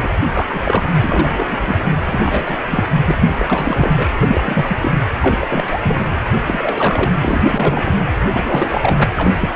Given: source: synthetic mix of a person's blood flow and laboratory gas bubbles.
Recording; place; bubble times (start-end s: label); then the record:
Doppler ultrasound of blood flow; precordium
0.02-0.10 s: bubbles
0.32-0.60 s: bubbles
0.64-0.92 s: bubbles
1.01-1.57 s: bubbles
1.60-1.93 s: bubbles
2.10-2.60 s: bubbles
2.69-2.84 s: bubbles
3.06-3.17 s: bubbles
3.38-4.09 s: bubbles
4.20-4.41 s: bubbles
4.44-4.98 s: bubbles
5.22-5.80 s: bubbles
5.83-6.01 s: bubbles
6.33-6.41 s: bubbles
6.46-7.12 s: bubbles
7.21-7.42 s: bubbles
7.45-7.96 s: bubbles
8.33-9.10 s: bubbles
9.17-9.51 s: bubbles
From the record:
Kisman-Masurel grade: 342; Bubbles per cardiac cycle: rolling drumbeat, 9 or more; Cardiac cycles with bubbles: 100%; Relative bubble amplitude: moderate (0.250 to 0.450); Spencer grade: 3 (all of the cardiac periods contain showers or single bubble signals, but not dominating or overriding the cardiac motion signals); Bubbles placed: anywhere in the cardiac cycle